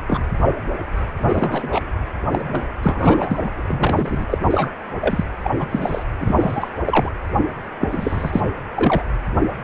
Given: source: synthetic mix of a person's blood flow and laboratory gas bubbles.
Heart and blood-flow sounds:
Doppler ultrasound of blood flow; precordium
0.07-0.24 s: bubbles
1.28-1.81 s: bubbles
2.31-2.73 s: bubbles
2.83-3.50 s: bubbles
3.56-4.25 s: bubbles
4.29-4.38 s: bubbles
4.50-4.72 s: bubbles
5.00-5.23 s: bubbles
5.43-5.54 s: bubbles
5.58-5.67 s: bubbles
5.70-6.03 s: bubbles
6.20-6.69 s: bubbles
6.84-7.12 s: bubbles
7.80-7.88 s: bubbles
7.91-8.41 s: bubbles
8.74-9.03 s: bubbles
From the record:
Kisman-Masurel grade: 233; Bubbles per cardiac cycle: several, 3 to 8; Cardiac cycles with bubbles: 50 to 99%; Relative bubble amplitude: loud (0.450 to 0.775); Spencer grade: 3 (all of the cardiac periods contain showers or single bubble signals, but not dominating or overriding the cardiac motion signals); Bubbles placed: anywhere in the cardiac cycle

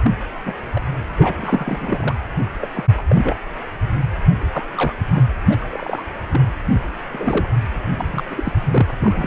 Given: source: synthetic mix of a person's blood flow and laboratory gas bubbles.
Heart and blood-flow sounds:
Doppler ultrasound of blood flow; precordium
0.02-0.12 s: bubbles
0.46-0.53 s: bubbles
0.75-0.80 s: bubbles
1.16-2.15 s: bubbles
2.61-2.68 s: bubbles
2.74-2.84 s: bubbles
2.97-3.02 s: bubbles
3.08-3.37 s: bubbles
4.52-4.65 s: bubbles
4.76-4.95 s: bubbles
5.14-5.23 s: bubbles
5.49-5.56 s: bubbles
5.59-6.05 s: bubbles
6.32-6.40 s: bubbles
7.12-7.46 s: bubbles
7.96-8.23 s: bubbles
8.30-8.53 s: bubbles
8.56-8.95 s: bubbles
8.99-9.27 s: bubbles
From the record:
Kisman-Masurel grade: 242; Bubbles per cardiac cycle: several, 3 to 8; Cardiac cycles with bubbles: 100%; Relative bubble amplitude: moderate (0.250 to 0.450); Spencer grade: 3 (all of the cardiac periods contain showers or single bubble signals, but not dominating or overriding the cardiac motion signals); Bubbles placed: anywhere in the cardiac cycle

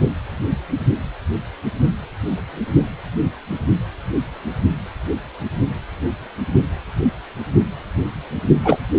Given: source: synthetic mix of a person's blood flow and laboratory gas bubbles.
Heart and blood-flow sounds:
Doppler ultrasound of blood flow; precordium
8.64-8.77 s: bubbles
From the record:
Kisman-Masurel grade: 213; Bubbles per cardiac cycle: several, 3 to 8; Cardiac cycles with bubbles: 1 to 10%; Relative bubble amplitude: loud (0.450 to 0.775); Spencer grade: 1 (occasional bubble signal discernible with the cardiac motion signal, with majority of cardiac periods free of bubbles); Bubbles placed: only in the low amplitude regions of the cardiac cycle

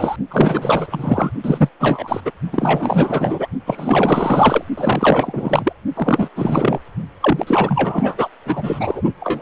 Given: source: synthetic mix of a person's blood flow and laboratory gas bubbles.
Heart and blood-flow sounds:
Doppler ultrasound of blood flow; precordium
0.00-0.16 s: bubbles
0.30-1.31 s: bubbles
1.43-1.69 s: bubbles
1.79-2.21 s: bubbles
2.25-2.32 s: bubbles
2.52-3.47 s: bubbles
3.66-4.64 s: bubbles
4.77-5.73 s: bubbles
5.95-6.29 s: bubbles
6.35-6.79 s: bubbles
7.21-8.29 s: bubbles
8.46-9.02 s: bubbles
9.20-9.42 s: bubbles
From the record:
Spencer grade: 4 (maximum detectable bubble signal sounding continuously throughout systole and diastole of every cardiac period, and overriding the amplitude of the normal cardiac signals); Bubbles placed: only in the low amplitude regions of the cardiac cycle

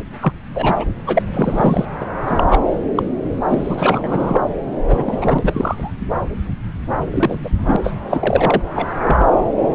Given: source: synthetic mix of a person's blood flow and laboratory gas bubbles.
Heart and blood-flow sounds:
Doppler ultrasound of blood flow; subclavian vein
0.21-0.33 s: bubbles
0.55-0.86 s: bubbles
1.06-1.23 s: bubbles
1.33-1.85 s: bubbles
2.00-2.05 s: bubbles
2.27-2.45 s: bubbles
2.49-2.61 s: bubbles
2.95-3.03 s: bubbles
3.48-4.43 s: bubbles
4.87-5.39 s: bubbles
5.42-5.93 s: bubbles
7.12-7.36 s: bubbles
7.43-7.50 s: bubbles
7.66-7.77 s: bubbles
7.83-7.92 s: bubbles
8.09-8.62 s: bubbles
8.75-8.88 s: bubbles
9.02-9.26 s: bubbles
From the record:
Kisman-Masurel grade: 243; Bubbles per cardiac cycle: several, 3 to 8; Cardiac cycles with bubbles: 100%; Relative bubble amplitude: loud (0.450 to 0.775); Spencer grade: 3 (all of the cardiac periods contain showers or single bubble signals, but not dominating or overriding the cardiac motion signals); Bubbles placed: anywhere in the cardiac cycle

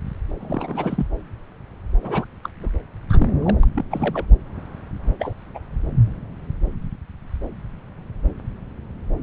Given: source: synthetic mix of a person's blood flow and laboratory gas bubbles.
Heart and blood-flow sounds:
Doppler ultrasound of blood flow; subclavian vein
0.40-1.06 s: bubbles
2.02-2.25 s: bubbles
2.43-2.49 s: bubbles
2.59-2.69 s: bubbles
3.09-3.29 s: bubbles
3.42-3.57 s: bubbles
3.63-3.67 s: bubbles
3.75-3.84 s: bubbles
3.90-4.25 s: bubbles
5.19-5.34 s: bubbles
5.54-5.58 s: bubbles
From the record:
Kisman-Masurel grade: 221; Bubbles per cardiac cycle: several, 3 to 8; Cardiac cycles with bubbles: 10 to 50%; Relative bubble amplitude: barely perceptible (0.100 to 0.250); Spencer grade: 2 (many but less than half of the cardiac periods contain bubble signals, singularly or in groups); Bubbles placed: anywhere in the cardiac cycle

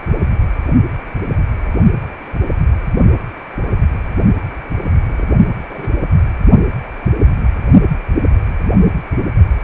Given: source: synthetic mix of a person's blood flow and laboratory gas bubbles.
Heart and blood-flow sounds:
Doppler ultrasound of blood flow; precordium
5.09-5.26 s: bubbles
5.63-5.88 s: bubbles
From the record:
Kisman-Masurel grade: 121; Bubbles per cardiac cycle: 1 to 2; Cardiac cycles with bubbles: 10 to 50%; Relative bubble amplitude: barely perceptible (0.100 to 0.250); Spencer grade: 2 (many but less than half of the cardiac periods contain bubble signals, singularly or in groups); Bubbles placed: only in the low amplitude regions of the cardiac cycle

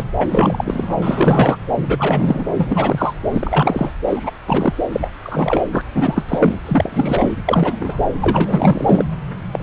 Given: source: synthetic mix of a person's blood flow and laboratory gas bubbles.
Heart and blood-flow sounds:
Doppler ultrasound of blood flow; subclavian vein
0.00-0.04 s: bubbles
0.19-0.96 s: bubbles
1.02-1.57 s: bubbles
1.75-2.46 s: bubbles
2.57-3.14 s: bubbles
3.31-3.93 s: bubbles
4.07-4.30 s: bubbles
4.46-4.74 s: bubbles
4.92-5.08 s: bubbles
5.22-5.63 s: bubbles
5.72-5.82 s: bubbles
5.94-6.24 s: bubbles
6.28-6.58 s: bubbles
6.66-7.33 s: bubbles
7.46-7.98 s: bubbles
8.21-9.04 s: bubbles
9.52-9.63 s: bubbles
From the record:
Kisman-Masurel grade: 343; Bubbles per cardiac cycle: rolling drumbeat, 9 or more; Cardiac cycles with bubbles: 100%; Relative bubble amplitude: loud (0.450 to 0.775); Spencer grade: 3 (all of the cardiac periods contain showers or single bubble signals, but not dominating or overriding the cardiac motion signals); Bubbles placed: anywhere in the cardiac cycle

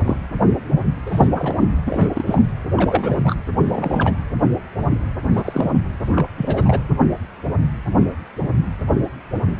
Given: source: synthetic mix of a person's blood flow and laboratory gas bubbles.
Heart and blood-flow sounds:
Doppler ultrasound of blood flow; precordium
0.05-0.17 s: bubbles
1.05-1.27 s: bubbles
1.34-1.77 s: bubbles
1.85-2.42 s: bubbles
2.77-3.35 s: bubbles
3.57-4.14 s: bubbles
5.35-5.71 s: bubbles
6.16-6.26 s: bubbles
6.37-6.80 s: bubbles
From the record:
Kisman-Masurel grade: 232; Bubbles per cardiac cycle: several, 3 to 8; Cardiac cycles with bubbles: 50 to 99%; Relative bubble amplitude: moderate (0.250 to 0.450); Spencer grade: 3 (all of the cardiac periods contain showers or single bubble signals, but not dominating or overriding the cardiac motion signals); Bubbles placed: anywhere in the cardiac cycle

